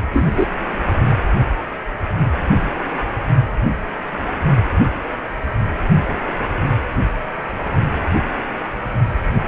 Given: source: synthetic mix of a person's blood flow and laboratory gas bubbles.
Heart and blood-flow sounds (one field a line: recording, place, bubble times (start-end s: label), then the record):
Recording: Doppler ultrasound of blood flow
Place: precordium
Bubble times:
0.13-0.46 s: bubbles
From the record:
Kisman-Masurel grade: 123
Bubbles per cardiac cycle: 1 to 2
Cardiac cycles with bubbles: 10 to 50%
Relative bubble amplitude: loud (0.450 to 0.775)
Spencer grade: 2 (many but less than half of the cardiac periods contain bubble signals, singularly or in groups)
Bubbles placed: only in the low amplitude regions of the cardiac cycle